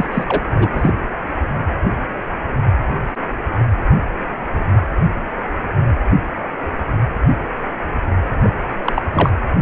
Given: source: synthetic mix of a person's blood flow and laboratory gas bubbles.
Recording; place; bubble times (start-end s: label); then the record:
Doppler ultrasound of blood flow; precordium
0.00-0.08 s: bubbles
0.12-0.24 s: bubbles
0.28-0.41 s: bubbles
0.56-0.92 s: bubbles
8.39-8.50 s: bubbles
8.84-9.02 s: bubbles
9.12-9.30 s: bubbles
From the record:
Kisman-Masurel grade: 223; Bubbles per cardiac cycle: several, 3 to 8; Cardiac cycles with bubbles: 10 to 50%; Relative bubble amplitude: loud (0.450 to 0.775); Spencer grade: 2 (many but less than half of the cardiac periods contain bubble signals, singularly or in groups); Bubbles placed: anywhere in the cardiac cycle